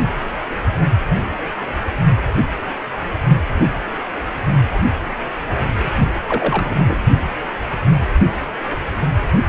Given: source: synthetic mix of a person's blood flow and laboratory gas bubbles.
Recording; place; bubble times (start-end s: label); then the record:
Doppler ultrasound of blood flow; precordium
6.29-6.97 s: bubbles
From the record:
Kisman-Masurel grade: 212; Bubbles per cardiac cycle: several, 3 to 8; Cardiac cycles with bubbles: 1 to 10%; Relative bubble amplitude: moderate (0.250 to 0.450); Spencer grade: 1 (occasional bubble signal discernible with the cardiac motion signal, with majority of cardiac periods free of bubbles); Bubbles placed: only in the low amplitude regions of the cardiac cycle